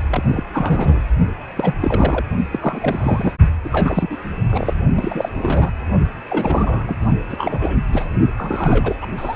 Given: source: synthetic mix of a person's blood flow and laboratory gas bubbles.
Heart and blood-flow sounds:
Doppler ultrasound of blood flow; precordium
0.09-0.23 s: bubbles
0.27-0.43 s: bubbles
0.52-1.01 s: bubbles
1.55-1.74 s: bubbles
1.80-2.25 s: bubbles
2.51-2.59 s: bubbles
2.62-3.34 s: bubbles
3.64-4.17 s: bubbles
4.50-4.74 s: bubbles
4.96-5.72 s: bubbles
6.25-6.96 s: bubbles
7.29-7.77 s: bubbles
7.92-8.07 s: bubbles
8.38-8.96 s: bubbles
9.02-9.06 s: bubbles
9.17-9.36 s: bubbles
From the record:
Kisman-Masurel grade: 342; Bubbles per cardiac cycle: rolling drumbeat, 9 or more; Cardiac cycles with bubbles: 100%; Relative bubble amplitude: moderate (0.250 to 0.450); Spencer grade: 3 (all of the cardiac periods contain showers or single bubble signals, but not dominating or overriding the cardiac motion signals); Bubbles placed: only in the low amplitude regions of the cardiac cycle

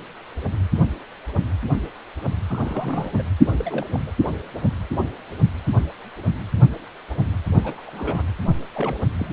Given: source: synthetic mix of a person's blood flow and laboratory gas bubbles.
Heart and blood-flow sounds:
Doppler ultrasound of blood flow; precordium
2.48-3.12 s: bubbles
3.17-3.23 s: bubbles
3.58-3.85 s: bubbles
3.92-3.99 s: bubbles
4.06-4.11 s: bubbles
7.63-7.90 s: bubbles
7.93-8.22 s: bubbles
8.74-8.99 s: bubbles
9.18-9.33 s: bubbles
From the record:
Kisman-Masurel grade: 221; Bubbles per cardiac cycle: several, 3 to 8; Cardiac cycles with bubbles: 10 to 50%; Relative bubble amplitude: barely perceptible (0.100 to 0.250); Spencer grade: 2 (many but less than half of the cardiac periods contain bubble signals, singularly or in groups); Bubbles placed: only in the low amplitude regions of the cardiac cycle

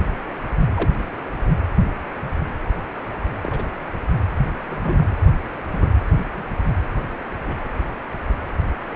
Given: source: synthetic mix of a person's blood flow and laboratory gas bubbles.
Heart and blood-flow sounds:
Doppler ultrasound of blood flow; precordium
0.75-0.90 s: bubbles
3.42-3.67 s: bubbles
4.66-5.09 s: bubbles
5.72-5.88 s: bubbles
6.37-6.44 s: bubbles
7.46-7.54 s: bubbles
From the record:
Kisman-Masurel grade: 122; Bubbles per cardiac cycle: 1 to 2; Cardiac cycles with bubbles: 10 to 50%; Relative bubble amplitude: moderate (0.250 to 0.450); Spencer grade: 2 (many but less than half of the cardiac periods contain bubble signals, singularly or in groups); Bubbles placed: anywhere in the cardiac cycle

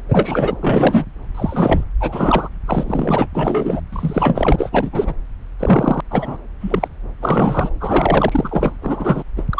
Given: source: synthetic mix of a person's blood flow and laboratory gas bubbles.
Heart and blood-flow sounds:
Doppler ultrasound of blood flow; subclavian vein
0.08-0.55 s: bubbles
0.60-1.05 s: bubbles
1.34-1.84 s: bubbles
2.00-2.49 s: bubbles
2.65-3.26 s: bubbles
3.33-3.80 s: bubbles
3.92-5.13 s: bubbles
5.59-6.00 s: bubbles
6.10-6.37 s: bubbles
6.61-6.88 s: bubbles
7.21-7.70 s: bubbles
7.80-8.76 s: bubbles
8.82-9.23 s: bubbles
9.37-9.43 s: bubbles
9.50-9.60 s: bubbles
From the record:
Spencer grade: 3 (all of the cardiac periods contain showers or single bubble signals, but not dominating or overriding the cardiac motion signals); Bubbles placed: anywhere in the cardiac cycle

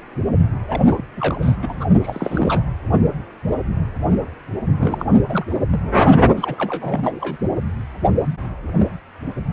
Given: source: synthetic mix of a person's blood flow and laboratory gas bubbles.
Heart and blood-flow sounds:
Doppler ultrasound of blood flow; precordium
0.68-0.82 s: bubbles
0.87-1.04 s: bubbles
1.16-1.57 s: bubbles
1.61-1.85 s: bubbles
2.02-2.72 s: bubbles
4.80-5.05 s: bubbles
5.29-5.44 s: bubbles
5.47-5.54 s: bubbles
5.70-5.80 s: bubbles
6.37-6.55 s: bubbles
6.58-7.38 s: bubbles
From the record:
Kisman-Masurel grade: 332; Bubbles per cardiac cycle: rolling drumbeat, 9 or more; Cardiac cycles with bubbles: 50 to 99%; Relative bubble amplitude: moderate (0.250 to 0.450); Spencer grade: 3 (all of the cardiac periods contain showers or single bubble signals, but not dominating or overriding the cardiac motion signals); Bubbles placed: only in the low amplitude regions of the cardiac cycle

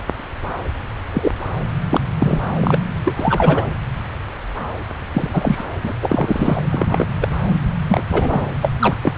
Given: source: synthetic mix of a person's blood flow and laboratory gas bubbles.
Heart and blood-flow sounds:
Doppler ultrasound of blood flow; subclavian vein
1.13-1.31 s: bubbles
1.90-2.01 s: bubbles
2.20-2.40 s: bubbles
2.61-2.79 s: bubbles
3.04-3.67 s: bubbles
5.13-5.64 s: bubbles
5.83-5.92 s: bubbles
6.01-6.62 s: bubbles
6.69-7.07 s: bubbles
7.21-7.28 s: bubbles
7.88-8.03 s: bubbles
8.08-8.46 s: bubbles
8.62-8.71 s: bubbles
8.80-8.96 s: bubbles
9.03-9.15 s: bubbles
From the record:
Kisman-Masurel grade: 233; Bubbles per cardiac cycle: several, 3 to 8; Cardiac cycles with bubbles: 50 to 99%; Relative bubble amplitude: loud (0.450 to 0.775); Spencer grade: 3 (all of the cardiac periods contain showers or single bubble signals, but not dominating or overriding the cardiac motion signals); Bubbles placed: anywhere in the cardiac cycle

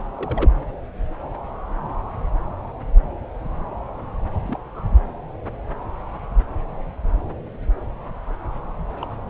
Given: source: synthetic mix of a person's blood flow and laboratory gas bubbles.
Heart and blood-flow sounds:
Doppler ultrasound of blood flow; subclavian vein
0.14-0.51 s: bubbles
4.44-4.59 s: bubbles
4.74-4.85 s: bubbles
8.89-9.15 s: bubbles
9.18-9.22 s: bubbles
From the record:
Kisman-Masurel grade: 221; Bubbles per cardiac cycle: several, 3 to 8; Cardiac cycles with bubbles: 10 to 50%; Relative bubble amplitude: barely perceptible (0.100 to 0.250); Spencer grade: 2 (many but less than half of the cardiac periods contain bubble signals, singularly or in groups); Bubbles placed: anywhere in the cardiac cycle

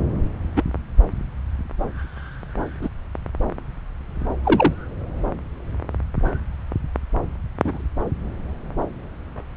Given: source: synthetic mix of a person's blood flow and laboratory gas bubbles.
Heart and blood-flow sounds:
Doppler ultrasound of blood flow; subclavian vein
0.56-0.64 s: bubbles
2.81-2.89 s: bubbles
4.44-4.74 s: bubbles
7.64-7.82 s: bubbles
From the record:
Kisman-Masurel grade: 122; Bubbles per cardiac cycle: 1 to 2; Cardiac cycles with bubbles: 10 to 50%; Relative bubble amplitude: moderate (0.250 to 0.450); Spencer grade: 2 (many but less than half of the cardiac periods contain bubble signals, singularly or in groups); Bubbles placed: anywhere in the cardiac cycle

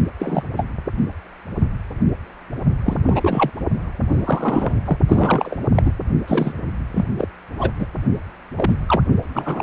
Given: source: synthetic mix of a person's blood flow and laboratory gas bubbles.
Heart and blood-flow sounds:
Doppler ultrasound of blood flow; precordium
0.19-0.43 s: bubbles
0.57-0.67 s: bubbles
2.85-2.97 s: bubbles
3.05-3.50 s: bubbles
4.10-4.74 s: bubbles
4.85-4.98 s: bubbles
5.07-5.56 s: bubbles
5.74-5.93 s: bubbles
6.27-6.52 s: bubbles
6.93-7.05 s: bubbles
7.17-7.27 s: bubbles
7.58-7.71 s: bubbles
7.79-7.86 s: bubbles
8.55-8.76 s: bubbles
8.87-9.02 s: bubbles
9.35-9.63 s: bubbles
From the record:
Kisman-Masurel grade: 233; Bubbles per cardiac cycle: several, 3 to 8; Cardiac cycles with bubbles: 50 to 99%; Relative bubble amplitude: loud (0.450 to 0.775); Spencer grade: 3 (all of the cardiac periods contain showers or single bubble signals, but not dominating or overriding the cardiac motion signals); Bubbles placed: only in the low amplitude regions of the cardiac cycle

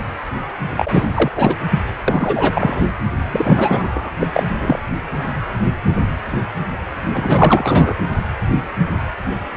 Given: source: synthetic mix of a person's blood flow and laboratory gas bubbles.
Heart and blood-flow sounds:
Doppler ultrasound of blood flow; precordium
0.77-1.31 s: bubbles
1.35-1.55 s: bubbles
1.70-1.80 s: bubbles
2.08-2.82 s: bubbles
3.31-4.11 s: bubbles
4.19-4.28 s: bubbles
4.34-4.44 s: bubbles
4.58-4.79 s: bubbles
7.12-7.95 s: bubbles
From the record:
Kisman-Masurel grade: 333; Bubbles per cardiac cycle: rolling drumbeat, 9 or more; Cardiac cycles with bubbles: 50 to 99%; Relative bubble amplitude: loud (0.450 to 0.775); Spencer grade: 3 (all of the cardiac periods contain showers or single bubble signals, but not dominating or overriding the cardiac motion signals); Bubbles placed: anywhere in the cardiac cycle

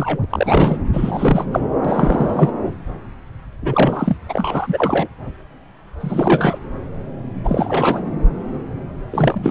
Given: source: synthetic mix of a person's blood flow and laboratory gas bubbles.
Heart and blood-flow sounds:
Doppler ultrasound of blood flow; subclavian vein
0.00-0.26 s: bubbles
0.30-0.78 s: bubbles
0.93-1.45 s: bubbles
1.51-1.61 s: bubbles
1.84-2.50 s: bubbles
3.62-4.17 s: bubbles
4.29-5.08 s: bubbles
6.00-6.59 s: bubbles
7.44-8.02 s: bubbles
9.11-9.51 s: bubbles
From the record:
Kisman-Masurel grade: 333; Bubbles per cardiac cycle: rolling drumbeat, 9 or more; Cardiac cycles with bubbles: 50 to 99%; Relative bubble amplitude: loud (0.450 to 0.775); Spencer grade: 3 (all of the cardiac periods contain showers or single bubble signals, but not dominating or overriding the cardiac motion signals); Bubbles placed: anywhere in the cardiac cycle

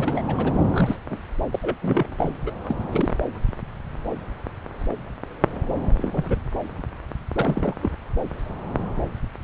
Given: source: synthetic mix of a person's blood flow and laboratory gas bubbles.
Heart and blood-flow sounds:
Doppler ultrasound of blood flow; subclavian vein
0.00-0.24 s: bubbles
0.27-0.53 s: bubbles
0.72-0.96 s: bubbles
1.10-1.20 s: bubbles
1.51-1.59 s: bubbles
1.62-1.77 s: bubbles
1.82-2.15 s: bubbles
2.18-2.35 s: bubbles
2.46-2.52 s: bubbles
2.68-2.77 s: bubbles
2.92-3.09 s: bubbles
5.97-6.38 s: bubbles
7.35-7.75 s: bubbles
7.82-7.90 s: bubbles
From the record:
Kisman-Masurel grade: 221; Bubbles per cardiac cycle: several, 3 to 8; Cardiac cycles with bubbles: 10 to 50%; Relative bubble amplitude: barely perceptible (0.100 to 0.250); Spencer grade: 2 (many but less than half of the cardiac periods contain bubble signals, singularly or in groups); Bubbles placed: anywhere in the cardiac cycle

